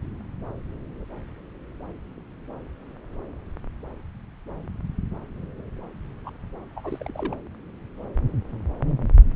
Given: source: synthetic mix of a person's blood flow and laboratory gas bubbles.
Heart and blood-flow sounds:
Doppler ultrasound of blood flow; subclavian vein
6.25-6.30 s: bubbles
6.76-6.81 s: bubbles
6.83-7.38 s: bubbles
From the record:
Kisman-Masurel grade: 221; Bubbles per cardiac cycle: several, 3 to 8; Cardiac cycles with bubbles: 10 to 50%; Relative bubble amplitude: barely perceptible (0.100 to 0.250); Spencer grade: 2 (many but less than half of the cardiac periods contain bubble signals, singularly or in groups); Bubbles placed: anywhere in the cardiac cycle

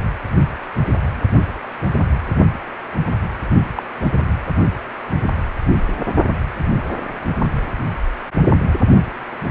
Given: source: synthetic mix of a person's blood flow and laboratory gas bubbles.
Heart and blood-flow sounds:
Doppler ultrasound of blood flow; precordium
3.76-3.83 s: bubbles
4.00-4.14 s: bubbles
From the record:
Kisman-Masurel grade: 112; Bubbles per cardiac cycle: 1 to 2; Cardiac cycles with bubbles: 1 to 10%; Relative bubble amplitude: moderate (0.250 to 0.450); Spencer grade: 1 (occasional bubble signal discernible with the cardiac motion signal, with majority of cardiac periods free of bubbles); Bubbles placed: only in the low amplitude regions of the cardiac cycle

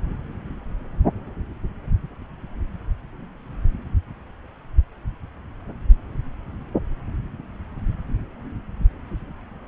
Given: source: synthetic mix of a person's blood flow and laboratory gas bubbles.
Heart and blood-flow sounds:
Doppler ultrasound of blood flow; subclavian vein
no bubbles
From the record:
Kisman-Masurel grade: 000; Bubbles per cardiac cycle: 0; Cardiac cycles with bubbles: 0%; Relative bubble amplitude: no bubbles discernible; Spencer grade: 0 (complete lack of bubble signals)

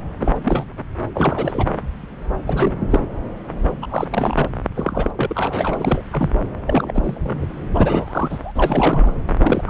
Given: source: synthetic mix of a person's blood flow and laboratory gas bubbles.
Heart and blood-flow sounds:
Doppler ultrasound of blood flow; subclavian vein
0.20-0.34 s: bubbles
0.43-0.65 s: bubbles
1.13-1.67 s: bubbles
2.47-2.71 s: bubbles
2.79-3.08 s: bubbles
3.81-4.07 s: bubbles
4.09-4.49 s: bubbles
4.74-5.11 s: bubbles
5.17-6.01 s: bubbles
6.12-6.30 s: bubbles
6.67-6.92 s: bubbles
6.94-7.46 s: bubbles
7.75-8.52 s: bubbles
8.55-9.14 s: bubbles
9.39-9.70 s: bubbles
From the record:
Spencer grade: 3 (all of the cardiac periods contain showers or single bubble signals, but not dominating or overriding the cardiac motion signals); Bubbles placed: anywhere in the cardiac cycle

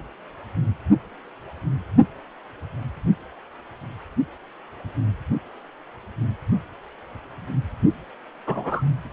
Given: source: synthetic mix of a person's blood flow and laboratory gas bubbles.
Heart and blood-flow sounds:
Doppler ultrasound of blood flow; precordium
8.46-8.82 s: bubbles
From the record:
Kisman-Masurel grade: 122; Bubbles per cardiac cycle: 1 to 2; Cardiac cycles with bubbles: 10 to 50%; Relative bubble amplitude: moderate (0.250 to 0.450); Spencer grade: 2 (many but less than half of the cardiac periods contain bubble signals, singularly or in groups); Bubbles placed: only in the low amplitude regions of the cardiac cycle

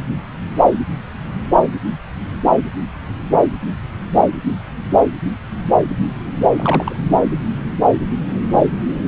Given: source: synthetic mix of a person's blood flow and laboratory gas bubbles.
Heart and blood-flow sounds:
Doppler ultrasound of blood flow; subclavian vein
6.56-6.96 s: bubbles
From the record:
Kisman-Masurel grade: 112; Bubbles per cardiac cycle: 1 to 2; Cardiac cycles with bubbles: 1 to 10%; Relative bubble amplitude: moderate (0.250 to 0.450); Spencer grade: 1 (occasional bubble signal discernible with the cardiac motion signal, with majority of cardiac periods free of bubbles); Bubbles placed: anywhere in the cardiac cycle

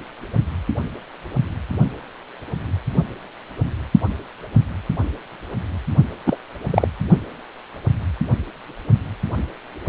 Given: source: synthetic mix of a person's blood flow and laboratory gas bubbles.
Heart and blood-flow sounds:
Doppler ultrasound of blood flow; precordium
6.26-6.37 s: bubbles
6.71-6.87 s: bubbles
From the record:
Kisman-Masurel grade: 123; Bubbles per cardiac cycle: 1 to 2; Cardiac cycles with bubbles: 10 to 50%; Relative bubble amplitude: loud (0.450 to 0.775); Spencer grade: 2 (many but less than half of the cardiac periods contain bubble signals, singularly or in groups); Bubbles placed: only in the low amplitude regions of the cardiac cycle

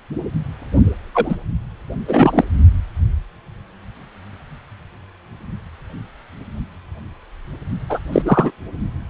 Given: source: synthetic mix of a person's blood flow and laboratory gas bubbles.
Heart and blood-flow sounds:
Doppler ultrasound of blood flow; precordium
1.13-1.35 s: bubbles
2.07-2.44 s: bubbles
7.89-8.00 s: bubbles
8.12-8.22 s: bubbles
8.25-8.50 s: bubbles
From the record:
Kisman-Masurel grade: 223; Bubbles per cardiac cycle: several, 3 to 8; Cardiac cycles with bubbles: 10 to 50%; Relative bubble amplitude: loud (0.450 to 0.775); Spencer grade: 2 (many but less than half of the cardiac periods contain bubble signals, singularly or in groups); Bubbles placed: only in the low amplitude regions of the cardiac cycle

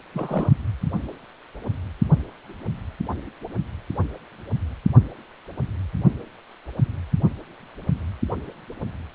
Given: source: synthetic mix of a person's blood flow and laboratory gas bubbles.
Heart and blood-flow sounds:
Doppler ultrasound of blood flow; precordium
0.14-0.50 s: bubbles
From the record:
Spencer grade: 1 (occasional bubble signal discernible with the cardiac motion signal, with majority of cardiac periods free of bubbles); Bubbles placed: only in the low amplitude regions of the cardiac cycle

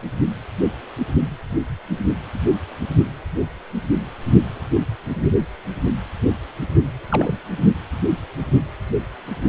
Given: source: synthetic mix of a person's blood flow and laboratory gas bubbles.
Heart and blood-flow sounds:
Doppler ultrasound of blood flow; precordium
7.09-7.39 s: bubbles
From the record:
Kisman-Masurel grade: 212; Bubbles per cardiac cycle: several, 3 to 8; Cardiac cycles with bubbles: 1 to 10%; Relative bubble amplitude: moderate (0.250 to 0.450); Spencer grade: 1 (occasional bubble signal discernible with the cardiac motion signal, with majority of cardiac periods free of bubbles); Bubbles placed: anywhere in the cardiac cycle

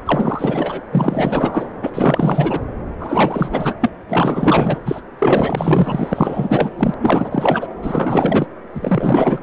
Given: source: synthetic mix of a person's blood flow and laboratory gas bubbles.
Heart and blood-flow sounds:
Doppler ultrasound of blood flow; subclavian vein
0.05-0.80 s: bubbles
0.92-1.67 s: bubbles
1.83-2.60 s: bubbles
2.98-3.75 s: bubbles
3.80-3.92 s: bubbles
4.09-4.79 s: bubbles
4.85-5.01 s: bubbles
5.18-6.70 s: bubbles
6.77-6.95 s: bubbles
7.01-7.67 s: bubbles
7.82-8.48 s: bubbles
8.74-9.38 s: bubbles
From the record:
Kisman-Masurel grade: 444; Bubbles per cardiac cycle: continuous sound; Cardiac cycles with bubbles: 100%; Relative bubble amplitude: maximal (0.775 to 0.999); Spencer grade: 4 (maximum detectable bubble signal sounding continuously throughout systole and diastole of every cardiac period, and overriding the amplitude of the normal cardiac signals); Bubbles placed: anywhere in the cardiac cycle

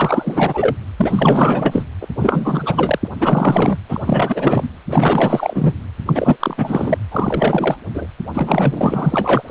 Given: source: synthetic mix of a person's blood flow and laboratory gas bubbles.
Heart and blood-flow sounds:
Doppler ultrasound of blood flow; precordium
0.00-0.76 s: bubbles
0.97-1.83 s: bubbles
2.01-2.07 s: bubbles
2.17-2.98 s: bubbles
3.04-3.08 s: bubbles
3.19-3.77 s: bubbles
3.89-4.69 s: bubbles
4.88-5.73 s: bubbles
6.06-6.37 s: bubbles
6.40-6.98 s: bubbles
7.11-7.75 s: bubbles
7.94-8.06 s: bubbles
8.34-9.42 s: bubbles
9.47-9.51 s: bubbles
From the record:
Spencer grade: 4 (maximum detectable bubble signal sounding continuously throughout systole and diastole of every cardiac period, and overriding the amplitude of the normal cardiac signals); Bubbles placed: anywhere in the cardiac cycle

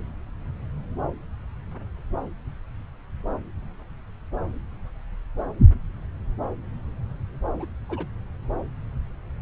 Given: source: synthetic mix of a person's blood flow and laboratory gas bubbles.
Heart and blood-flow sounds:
Doppler ultrasound of blood flow; subclavian vein
7.55-7.66 s: bubbles
7.89-8.06 s: bubbles
From the record:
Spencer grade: 1 (occasional bubble signal discernible with the cardiac motion signal, with majority of cardiac periods free of bubbles); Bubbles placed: anywhere in the cardiac cycle

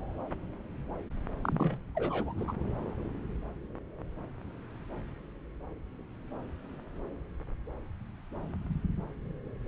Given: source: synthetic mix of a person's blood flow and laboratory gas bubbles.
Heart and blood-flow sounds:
Doppler ultrasound of blood flow; subclavian vein
1.41-1.77 s: bubbles
1.95-2.33 s: bubbles
2.38-2.53 s: bubbles
From the record:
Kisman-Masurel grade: 211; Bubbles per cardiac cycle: several, 3 to 8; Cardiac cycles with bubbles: 1 to 10%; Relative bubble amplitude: barely perceptible (0.100 to 0.250); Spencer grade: 1 (occasional bubble signal discernible with the cardiac motion signal, with majority of cardiac periods free of bubbles); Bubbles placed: anywhere in the cardiac cycle

